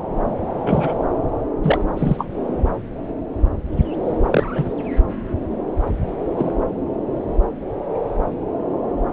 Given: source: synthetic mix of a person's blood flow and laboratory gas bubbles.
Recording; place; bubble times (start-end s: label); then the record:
Doppler ultrasound of blood flow; subclavian vein
0.66-0.93 s: bubbles
1.62-1.85 s: bubbles
1.96-2.28 s: bubbles
4.30-4.44 s: bubbles
4.54-4.74 s: bubbles
6.37-6.54 s: bubbles
From the record:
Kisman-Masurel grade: 123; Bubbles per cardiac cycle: 1 to 2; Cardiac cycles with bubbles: 10 to 50%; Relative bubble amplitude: loud (0.450 to 0.775); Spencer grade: 2 (many but less than half of the cardiac periods contain bubble signals, singularly or in groups); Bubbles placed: anywhere in the cardiac cycle